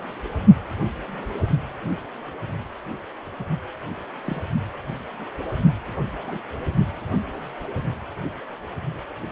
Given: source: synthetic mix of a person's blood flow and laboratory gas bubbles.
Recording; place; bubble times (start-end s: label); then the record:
Doppler ultrasound of blood flow; precordium
4.25-4.42 s: bubbles
6.22-6.40 s: bubbles
From the record:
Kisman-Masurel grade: 121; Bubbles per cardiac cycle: 1 to 2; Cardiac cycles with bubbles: 10 to 50%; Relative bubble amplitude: barely perceptible (0.100 to 0.250); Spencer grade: 2 (many but less than half of the cardiac periods contain bubble signals, singularly or in groups); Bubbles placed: only in the low amplitude regions of the cardiac cycle